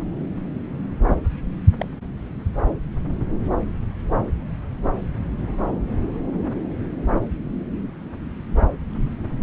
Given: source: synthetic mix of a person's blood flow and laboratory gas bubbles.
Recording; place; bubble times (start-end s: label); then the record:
Doppler ultrasound of blood flow; subclavian vein
1.79-1.88 s: bubbles
8.91-9.09 s: bubbles
From the record:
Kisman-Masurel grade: 121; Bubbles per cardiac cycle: 1 to 2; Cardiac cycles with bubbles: 10 to 50%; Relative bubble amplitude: barely perceptible (0.100 to 0.250); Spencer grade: 2 (many but less than half of the cardiac periods contain bubble signals, singularly or in groups); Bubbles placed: anywhere in the cardiac cycle